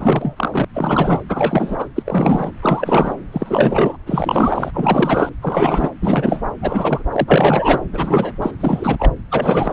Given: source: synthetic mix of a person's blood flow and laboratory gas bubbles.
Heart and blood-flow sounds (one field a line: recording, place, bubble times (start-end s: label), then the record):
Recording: Doppler ultrasound of blood flow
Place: subclavian vein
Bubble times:
0.00-0.65 s: bubbles
0.74-1.20 s: bubbles
1.29-1.89 s: bubbles
1.95-2.51 s: bubbles
2.62-3.15 s: bubbles
3.32-3.97 s: bubbles
4.06-4.71 s: bubbles
4.74-5.29 s: bubbles
5.42-5.92 s: bubbles
6.02-6.42 s: bubbles
6.62-7.03 s: bubbles
7.12-7.25 s: bubbles
7.27-7.82 s: bubbles
7.93-8.32 s: bubbles
8.42-8.51 s: bubbles
8.60-8.96 s: bubbles
8.99-9.12 s: bubbles
9.31-9.73 s: bubbles
From the record:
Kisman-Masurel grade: 343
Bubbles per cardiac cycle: rolling drumbeat, 9 or more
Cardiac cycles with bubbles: 100%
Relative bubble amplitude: loud (0.450 to 0.775)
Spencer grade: 3 (all of the cardiac periods contain showers or single bubble signals, but not dominating or overriding the cardiac motion signals)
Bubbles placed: anywhere in the cardiac cycle